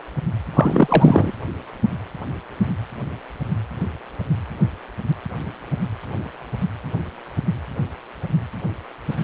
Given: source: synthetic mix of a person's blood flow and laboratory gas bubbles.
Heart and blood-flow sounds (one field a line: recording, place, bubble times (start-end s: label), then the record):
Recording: Doppler ultrasound of blood flow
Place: precordium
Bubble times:
0.54-1.32 s: bubbles
From the record:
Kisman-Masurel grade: 213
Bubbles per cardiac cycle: several, 3 to 8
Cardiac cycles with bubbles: 1 to 10%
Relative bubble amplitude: loud (0.450 to 0.775)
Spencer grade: 1 (occasional bubble signal discernible with the cardiac motion signal, with majority of cardiac periods free of bubbles)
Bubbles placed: anywhere in the cardiac cycle